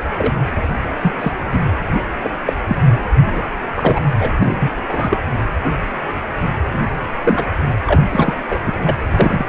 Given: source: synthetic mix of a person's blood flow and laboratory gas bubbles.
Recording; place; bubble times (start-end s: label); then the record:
Doppler ultrasound of blood flow; precordium
0.17-0.32 s: bubbles
1.01-1.12 s: bubbles
1.21-1.33 s: bubbles
1.52-1.60 s: bubbles
2.23-2.29 s: bubbles
2.45-2.53 s: bubbles
2.67-2.77 s: bubbles
3.30-3.42 s: bubbles
3.75-4.00 s: bubbles
4.20-4.33 s: bubbles
4.38-4.71 s: bubbles
4.89-5.17 s: bubbles
6.72-6.80 s: bubbles
7.25-7.47 s: bubbles
7.87-8.02 s: bubbles
8.10-8.34 s: bubbles
8.50-8.60 s: bubbles
8.64-8.73 s: bubbles
8.85-8.95 s: bubbles
9.10-9.46 s: bubbles
From the record:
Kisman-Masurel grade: 232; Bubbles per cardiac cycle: several, 3 to 8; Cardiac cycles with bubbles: 50 to 99%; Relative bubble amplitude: moderate (0.250 to 0.450); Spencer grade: 3 (all of the cardiac periods contain showers or single bubble signals, but not dominating or overriding the cardiac motion signals); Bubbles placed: anywhere in the cardiac cycle